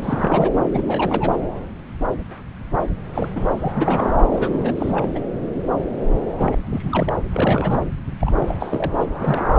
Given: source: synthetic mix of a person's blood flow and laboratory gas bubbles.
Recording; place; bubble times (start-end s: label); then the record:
Doppler ultrasound of blood flow; subclavian vein
0.02-0.51 s: bubbles
0.72-1.39 s: bubbles
3.14-3.29 s: bubbles
3.35-4.15 s: bubbles
4.31-5.09 s: bubbles
5.15-5.19 s: bubbles
6.38-7.14 s: bubbles
7.30-7.83 s: bubbles
8.20-8.56 s: bubbles
8.59-8.92 s: bubbles
8.99-9.06 s: bubbles
9.21-9.45 s: bubbles
9.51-9.59 s: bubbles
From the record:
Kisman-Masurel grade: 332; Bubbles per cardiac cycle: rolling drumbeat, 9 or more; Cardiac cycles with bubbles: 50 to 99%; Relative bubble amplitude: moderate (0.250 to 0.450); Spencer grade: 3 (all of the cardiac periods contain showers or single bubble signals, but not dominating or overriding the cardiac motion signals); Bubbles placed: anywhere in the cardiac cycle